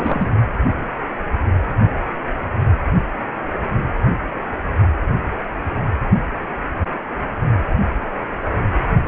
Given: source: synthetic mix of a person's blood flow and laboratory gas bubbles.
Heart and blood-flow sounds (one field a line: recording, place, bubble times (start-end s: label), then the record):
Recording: Doppler ultrasound of blood flow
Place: precordium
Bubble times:
0.00-0.28 s: bubbles
From the record:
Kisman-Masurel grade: 223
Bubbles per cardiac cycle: several, 3 to 8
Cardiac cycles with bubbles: 10 to 50%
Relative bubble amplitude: loud (0.450 to 0.775)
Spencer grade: 2 (many but less than half of the cardiac periods contain bubble signals, singularly or in groups)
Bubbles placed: only in the low amplitude regions of the cardiac cycle